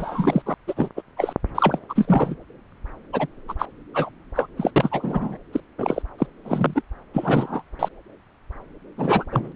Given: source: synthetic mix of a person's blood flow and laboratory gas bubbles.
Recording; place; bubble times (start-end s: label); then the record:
Doppler ultrasound of blood flow; subclavian vein
0.00-0.42 s: bubbles
0.46-0.54 s: bubbles
0.67-0.90 s: bubbles
0.96-1.02 s: bubbles
1.17-1.33 s: bubbles
1.55-1.80 s: bubbles
1.89-2.35 s: bubbles
3.12-3.27 s: bubbles
3.48-3.54 s: bubbles
3.58-3.66 s: bubbles
3.94-4.09 s: bubbles
4.35-4.47 s: bubbles
4.56-4.70 s: bubbles
4.76-5.38 s: bubbles
5.53-5.60 s: bubbles
5.78-6.02 s: bubbles
6.18-6.26 s: bubbles
6.44-6.82 s: bubbles
7.13-7.62 s: bubbles
7.79-7.88 s: bubbles
8.97-9.24 s: bubbles
9.31-9.52 s: bubbles
From the record:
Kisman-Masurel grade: 233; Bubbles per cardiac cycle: several, 3 to 8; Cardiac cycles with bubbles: 50 to 99%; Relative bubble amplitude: loud (0.450 to 0.775); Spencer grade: 3 (all of the cardiac periods contain showers or single bubble signals, but not dominating or overriding the cardiac motion signals); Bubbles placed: anywhere in the cardiac cycle